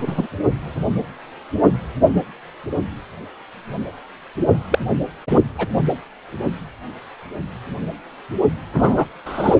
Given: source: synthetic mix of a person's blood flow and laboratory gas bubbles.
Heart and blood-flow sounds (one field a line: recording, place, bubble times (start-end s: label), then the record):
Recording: Doppler ultrasound of blood flow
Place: precordium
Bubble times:
0.00-0.28 s: bubbles
4.70-4.79 s: bubbles
5.29-5.39 s: bubbles
5.58-5.67 s: bubbles
8.73-9.05 s: bubbles
9.25-9.56 s: bubbles
From the record:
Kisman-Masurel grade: 223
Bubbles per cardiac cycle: several, 3 to 8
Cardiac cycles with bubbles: 10 to 50%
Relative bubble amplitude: loud (0.450 to 0.775)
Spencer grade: 2 (many but less than half of the cardiac periods contain bubble signals, singularly or in groups)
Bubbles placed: anywhere in the cardiac cycle